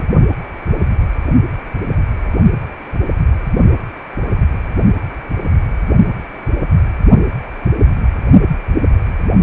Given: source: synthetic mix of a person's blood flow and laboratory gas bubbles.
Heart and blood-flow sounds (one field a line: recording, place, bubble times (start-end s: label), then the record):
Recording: Doppler ultrasound of blood flow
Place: precordium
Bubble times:
0.00-0.04 s: bubbles
From the record:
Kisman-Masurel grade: 213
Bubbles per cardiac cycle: several, 3 to 8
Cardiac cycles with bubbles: 1 to 10%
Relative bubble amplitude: loud (0.450 to 0.775)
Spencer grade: 1 (occasional bubble signal discernible with the cardiac motion signal, with majority of cardiac periods free of bubbles)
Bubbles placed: only in the low amplitude regions of the cardiac cycle